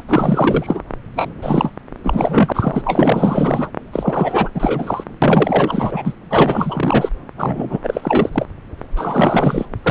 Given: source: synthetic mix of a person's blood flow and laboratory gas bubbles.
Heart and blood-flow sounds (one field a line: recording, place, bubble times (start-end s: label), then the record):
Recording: Doppler ultrasound of blood flow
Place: subclavian vein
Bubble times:
0.00-0.03 s: bubbles
0.08-0.82 s: bubbles
1.16-1.29 s: bubbles
1.42-1.73 s: bubbles
2.03-3.70 s: bubbles
3.93-4.49 s: bubbles
4.54-5.04 s: bubbles
5.22-6.13 s: bubbles
6.31-7.09 s: bubbles
7.37-7.79 s: bubbles
7.83-8.29 s: bubbles
8.32-8.46 s: bubbles
8.96-9.65 s: bubbles
9.83-9.91 s: bubbles
From the record:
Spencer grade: 4 (maximum detectable bubble signal sounding continuously throughout systole and diastole of every cardiac period, and overriding the amplitude of the normal cardiac signals)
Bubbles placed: anywhere in the cardiac cycle